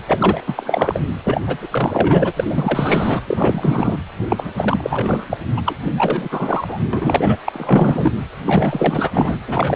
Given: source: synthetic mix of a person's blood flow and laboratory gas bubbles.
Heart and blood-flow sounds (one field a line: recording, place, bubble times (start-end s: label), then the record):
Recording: Doppler ultrasound of blood flow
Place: precordium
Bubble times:
0.07-0.43 s: bubbles
0.46-0.99 s: bubbles
1.24-1.43 s: bubbles
1.46-1.68 s: bubbles
1.72-2.31 s: bubbles
2.36-3.19 s: bubbles
3.26-3.98 s: bubbles
4.29-4.52 s: bubbles
4.57-5.37 s: bubbles
5.56-5.61 s: bubbles
5.66-5.76 s: bubbles
5.97-6.29 s: bubbles
6.31-6.78 s: bubbles
6.93-7.37 s: bubbles
7.46-8.12 s: bubbles
8.45-9.39 s: bubbles
9.47-9.76 s: bubbles
From the record:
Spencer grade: 4 (maximum detectable bubble signal sounding continuously throughout systole and diastole of every cardiac period, and overriding the amplitude of the normal cardiac signals)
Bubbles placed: anywhere in the cardiac cycle